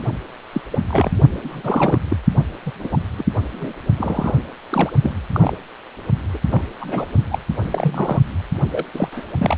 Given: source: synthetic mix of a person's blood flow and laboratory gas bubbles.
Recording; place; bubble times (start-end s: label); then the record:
Doppler ultrasound of blood flow; precordium
0.53-0.61 s: bubbles
0.72-0.84 s: bubbles
0.87-1.11 s: bubbles
1.44-1.99 s: bubbles
2.09-2.16 s: bubbles
2.65-2.72 s: bubbles
2.80-2.98 s: bubbles
3.17-3.24 s: bubbles
3.53-3.73 s: bubbles
3.98-4.34 s: bubbles
4.70-4.90 s: bubbles
5.02-5.15 s: bubbles
5.34-5.53 s: bubbles
6.33-6.38 s: bubbles
6.51-6.64 s: bubbles
6.80-7.07 s: bubbles
7.31-7.39 s: bubbles
7.62-8.20 s: bubbles
8.71-8.84 s: bubbles
8.93-9.09 s: bubbles
9.12-9.27 s: bubbles
9.38-9.56 s: bubbles
From the record:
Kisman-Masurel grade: 242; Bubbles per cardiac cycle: several, 3 to 8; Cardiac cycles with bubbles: 100%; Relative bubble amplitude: moderate (0.250 to 0.450); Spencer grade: 3 (all of the cardiac periods contain showers or single bubble signals, but not dominating or overriding the cardiac motion signals); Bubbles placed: only in the low amplitude regions of the cardiac cycle